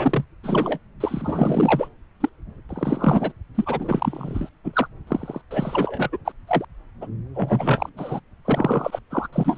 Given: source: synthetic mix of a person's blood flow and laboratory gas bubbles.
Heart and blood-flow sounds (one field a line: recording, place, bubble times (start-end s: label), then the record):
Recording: Doppler ultrasound of blood flow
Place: subclavian vein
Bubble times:
0.00-0.24 s: bubbles
0.43-0.79 s: bubbles
1.00-1.89 s: bubbles
2.20-2.29 s: bubbles
2.69-3.32 s: bubbles
3.54-4.49 s: bubbles
4.64-4.88 s: bubbles
5.07-5.42 s: bubbles
5.50-6.17 s: bubbles
6.25-6.32 s: bubbles
6.47-6.65 s: bubbles
7.01-7.06 s: bubbles
7.34-7.89 s: bubbles
7.97-8.20 s: bubbles
8.45-8.99 s: bubbles
9.11-9.28 s: bubbles
9.32-9.58 s: bubbles
From the record:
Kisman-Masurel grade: 342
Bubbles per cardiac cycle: rolling drumbeat, 9 or more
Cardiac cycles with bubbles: 100%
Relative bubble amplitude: moderate (0.250 to 0.450)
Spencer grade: 3 (all of the cardiac periods contain showers or single bubble signals, but not dominating or overriding the cardiac motion signals)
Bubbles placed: anywhere in the cardiac cycle